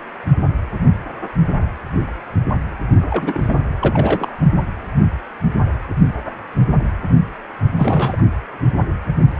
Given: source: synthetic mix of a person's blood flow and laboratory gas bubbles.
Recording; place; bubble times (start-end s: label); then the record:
Doppler ultrasound of blood flow; precordium
3.10-3.56 s: bubbles
3.79-4.33 s: bubbles
7.77-8.22 s: bubbles
From the record:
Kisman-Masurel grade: 222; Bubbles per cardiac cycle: several, 3 to 8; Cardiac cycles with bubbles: 10 to 50%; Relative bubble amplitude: moderate (0.250 to 0.450); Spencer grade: 2 (many but less than half of the cardiac periods contain bubble signals, singularly or in groups); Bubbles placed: anywhere in the cardiac cycle